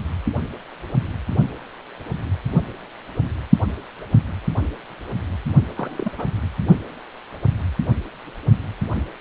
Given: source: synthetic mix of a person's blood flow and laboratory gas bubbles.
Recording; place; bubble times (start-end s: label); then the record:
Doppler ultrasound of blood flow; precordium
5.75-6.11 s: bubbles
6.17-6.25 s: bubbles
From the record:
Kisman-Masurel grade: 211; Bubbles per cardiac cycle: several, 3 to 8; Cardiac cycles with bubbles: 1 to 10%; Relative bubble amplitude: barely perceptible (0.100 to 0.250); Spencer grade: 1 (occasional bubble signal discernible with the cardiac motion signal, with majority of cardiac periods free of bubbles); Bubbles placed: only in the low amplitude regions of the cardiac cycle